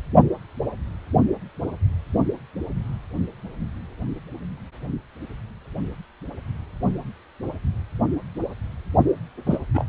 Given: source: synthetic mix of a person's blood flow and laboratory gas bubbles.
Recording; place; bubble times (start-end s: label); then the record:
Doppler ultrasound of blood flow; precordium
9.46-9.58 s: bubbles
9.73-9.84 s: bubbles
From the record:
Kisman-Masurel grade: 211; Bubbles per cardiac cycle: several, 3 to 8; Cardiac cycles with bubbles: 1 to 10%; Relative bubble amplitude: barely perceptible (0.100 to 0.250); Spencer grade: 1 (occasional bubble signal discernible with the cardiac motion signal, with majority of cardiac periods free of bubbles); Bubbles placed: only in the low amplitude regions of the cardiac cycle